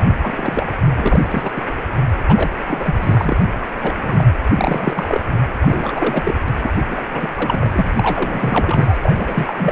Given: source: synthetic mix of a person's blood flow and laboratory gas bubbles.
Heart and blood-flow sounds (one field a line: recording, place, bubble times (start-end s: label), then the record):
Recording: Doppler ultrasound of blood flow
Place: precordium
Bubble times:
0.00-0.08 s: bubbles
0.22-0.68 s: bubbles
0.98-1.27 s: bubbles
1.30-1.51 s: bubbles
1.56-1.62 s: bubbles
2.27-2.50 s: bubbles
2.67-2.94 s: bubbles
3.01-3.37 s: bubbles
3.42-3.46 s: bubbles
3.61-3.69 s: bubbles
3.82-4.27 s: bubbles
4.55-5.21 s: bubbles
5.61-6.35 s: bubbles
6.46-6.74 s: bubbles
6.89-7.04 s: bubbles
7.12-7.29 s: bubbles
7.35-7.89 s: bubbles
7.95-8.97 s: bubbles
9.01-9.55 s: bubbles
9.58-9.72 s: bubbles
From the record:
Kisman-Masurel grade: 342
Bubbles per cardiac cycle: rolling drumbeat, 9 or more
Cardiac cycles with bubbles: 100%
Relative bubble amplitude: moderate (0.250 to 0.450)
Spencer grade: 3 (all of the cardiac periods contain showers or single bubble signals, but not dominating or overriding the cardiac motion signals)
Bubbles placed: anywhere in the cardiac cycle